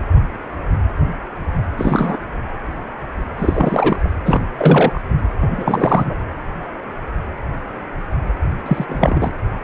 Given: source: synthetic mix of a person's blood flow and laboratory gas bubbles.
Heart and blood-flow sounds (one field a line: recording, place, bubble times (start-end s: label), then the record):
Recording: Doppler ultrasound of blood flow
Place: precordium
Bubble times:
1.77-2.19 s: bubbles
3.38-4.08 s: bubbles
4.25-4.44 s: bubbles
4.58-5.01 s: bubbles
5.40-6.15 s: bubbles
8.66-8.85 s: bubbles
8.88-9.31 s: bubbles
From the record:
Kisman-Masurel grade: 223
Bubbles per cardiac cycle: several, 3 to 8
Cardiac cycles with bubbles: 10 to 50%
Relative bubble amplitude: loud (0.450 to 0.775)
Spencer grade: 2 (many but less than half of the cardiac periods contain bubble signals, singularly or in groups)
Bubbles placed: anywhere in the cardiac cycle